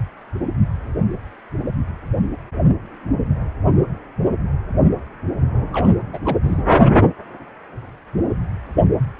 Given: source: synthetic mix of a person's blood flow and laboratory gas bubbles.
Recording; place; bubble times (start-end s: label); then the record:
Doppler ultrasound of blood flow; precordium
5.73-5.94 s: bubbles
6.12-6.20 s: bubbles
6.25-6.38 s: bubbles
6.44-6.62 s: bubbles
From the record:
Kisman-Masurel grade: 211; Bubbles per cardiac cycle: several, 3 to 8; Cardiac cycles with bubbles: 1 to 10%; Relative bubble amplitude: barely perceptible (0.100 to 0.250); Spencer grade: 1 (occasional bubble signal discernible with the cardiac motion signal, with majority of cardiac periods free of bubbles); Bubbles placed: only in the low amplitude regions of the cardiac cycle